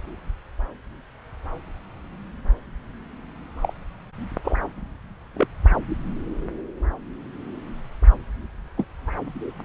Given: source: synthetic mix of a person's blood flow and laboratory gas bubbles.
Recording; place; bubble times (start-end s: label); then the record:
Doppler ultrasound of blood flow; subclavian vein
3.62-3.73 s: bubbles
4.44-4.57 s: bubbles
5.34-5.48 s: bubbles
8.77-8.86 s: bubbles
From the record:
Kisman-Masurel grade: 122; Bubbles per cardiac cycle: 1 to 2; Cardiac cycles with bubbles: 10 to 50%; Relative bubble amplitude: moderate (0.250 to 0.450); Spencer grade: 2 (many but less than half of the cardiac periods contain bubble signals, singularly or in groups); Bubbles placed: anywhere in the cardiac cycle